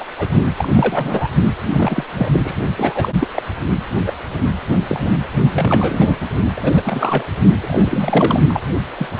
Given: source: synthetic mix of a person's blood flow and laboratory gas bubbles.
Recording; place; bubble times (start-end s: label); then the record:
Doppler ultrasound of blood flow; precordium
0.00-0.04 s: bubbles
0.18-0.28 s: bubbles
0.56-0.68 s: bubbles
0.75-1.29 s: bubbles
1.76-2.04 s: bubbles
2.08-2.29 s: bubbles
2.33-2.55 s: bubbles
2.76-3.12 s: bubbles
3.20-3.28 s: bubbles
3.34-3.42 s: bubbles
4.06-4.12 s: bubbles
4.88-5.00 s: bubbles
5.02-5.12 s: bubbles
5.52-6.16 s: bubbles
6.56-6.81 s: bubbles
6.85-7.25 s: bubbles
7.60-8.43 s: bubbles
8.48-8.61 s: bubbles
8.97-9.06 s: bubbles
9.17-9.20 s: bubbles
From the record:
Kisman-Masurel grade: 242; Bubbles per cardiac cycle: several, 3 to 8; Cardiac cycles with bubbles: 100%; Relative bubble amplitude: moderate (0.250 to 0.450); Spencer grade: 3 (all of the cardiac periods contain showers or single bubble signals, but not dominating or overriding the cardiac motion signals); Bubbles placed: only in the low amplitude regions of the cardiac cycle